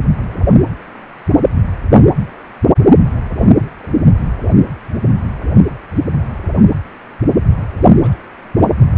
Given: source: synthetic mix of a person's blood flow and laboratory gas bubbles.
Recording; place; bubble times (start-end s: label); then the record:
Doppler ultrasound of blood flow; precordium
3.43-3.74 s: bubbles
3.83-3.86 s: bubbles
8.03-8.17 s: bubbles
From the record:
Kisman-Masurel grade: 121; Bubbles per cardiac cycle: 1 to 2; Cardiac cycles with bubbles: 10 to 50%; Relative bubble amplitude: barely perceptible (0.100 to 0.250); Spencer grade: 2 (many but less than half of the cardiac periods contain bubble signals, singularly or in groups); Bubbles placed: anywhere in the cardiac cycle